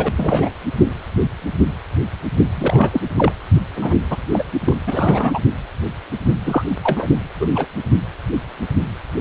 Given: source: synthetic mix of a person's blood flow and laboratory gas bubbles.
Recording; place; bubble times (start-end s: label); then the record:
Doppler ultrasound of blood flow; precordium
0.00-0.11 s: bubbles
0.17-0.51 s: bubbles
2.56-3.00 s: bubbles
3.16-3.32 s: bubbles
3.76-3.95 s: bubbles
4.10-4.17 s: bubbles
4.33-4.43 s: bubbles
4.66-4.77 s: bubbles
4.87-5.40 s: bubbles
6.45-6.64 s: bubbles
6.83-7.06 s: bubbles
7.40-7.47 s: bubbles
7.54-7.66 s: bubbles
From the record:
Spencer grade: 2 (many but less than half of the cardiac periods contain bubble signals, singularly or in groups); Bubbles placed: only in the low amplitude regions of the cardiac cycle